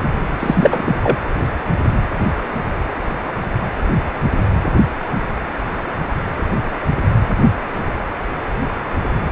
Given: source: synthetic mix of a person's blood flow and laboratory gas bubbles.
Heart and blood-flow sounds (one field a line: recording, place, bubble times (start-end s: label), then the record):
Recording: Doppler ultrasound of blood flow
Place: precordium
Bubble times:
0.39-0.82 s: bubbles
0.85-0.96 s: bubbles
1.03-1.18 s: bubbles
From the record:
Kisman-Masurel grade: 223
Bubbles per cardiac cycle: several, 3 to 8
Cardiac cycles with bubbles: 10 to 50%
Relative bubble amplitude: loud (0.450 to 0.775)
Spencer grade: 2 (many but less than half of the cardiac periods contain bubble signals, singularly or in groups)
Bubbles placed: anywhere in the cardiac cycle